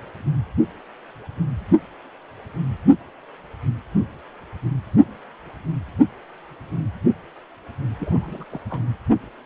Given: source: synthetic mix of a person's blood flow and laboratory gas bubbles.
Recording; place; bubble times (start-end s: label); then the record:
Doppler ultrasound of blood flow; precordium
7.99-8.45 s: bubbles
8.51-8.61 s: bubbles
8.70-8.82 s: bubbles
From the record:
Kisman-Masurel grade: 211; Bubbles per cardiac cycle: several, 3 to 8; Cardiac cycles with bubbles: 1 to 10%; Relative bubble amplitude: barely perceptible (0.100 to 0.250); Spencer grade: 1 (occasional bubble signal discernible with the cardiac motion signal, with majority of cardiac periods free of bubbles); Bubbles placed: anywhere in the cardiac cycle